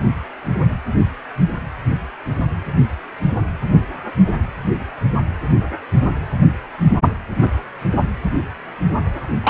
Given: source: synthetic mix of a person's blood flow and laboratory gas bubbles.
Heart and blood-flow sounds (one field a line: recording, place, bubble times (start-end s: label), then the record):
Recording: Doppler ultrasound of blood flow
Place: precordium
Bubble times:
9.43-9.50 s: bubbles
From the record:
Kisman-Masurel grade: 113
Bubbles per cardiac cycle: 1 to 2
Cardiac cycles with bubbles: 1 to 10%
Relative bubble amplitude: loud (0.450 to 0.775)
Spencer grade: 1 (occasional bubble signal discernible with the cardiac motion signal, with majority of cardiac periods free of bubbles)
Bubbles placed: anywhere in the cardiac cycle